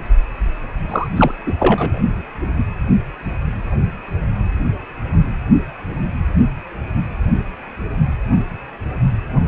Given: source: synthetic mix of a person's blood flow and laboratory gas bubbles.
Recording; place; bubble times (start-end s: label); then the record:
Doppler ultrasound of blood flow; precordium
0.90-1.07 s: bubbles
1.16-1.34 s: bubbles
1.46-1.52 s: bubbles
1.59-2.02 s: bubbles
From the record:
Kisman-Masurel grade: 213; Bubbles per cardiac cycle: several, 3 to 8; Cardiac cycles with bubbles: 1 to 10%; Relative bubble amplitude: loud (0.450 to 0.775); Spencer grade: 1 (occasional bubble signal discernible with the cardiac motion signal, with majority of cardiac periods free of bubbles); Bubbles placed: anywhere in the cardiac cycle